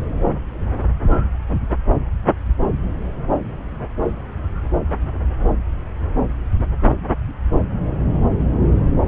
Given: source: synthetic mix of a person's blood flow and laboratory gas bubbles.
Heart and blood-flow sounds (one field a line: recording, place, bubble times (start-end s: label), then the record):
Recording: Doppler ultrasound of blood flow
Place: subclavian vein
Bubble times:
no bubbles
From the record:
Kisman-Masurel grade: 000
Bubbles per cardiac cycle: 0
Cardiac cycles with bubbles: 0%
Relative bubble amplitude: no bubbles discernible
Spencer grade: 0 (complete lack of bubble signals)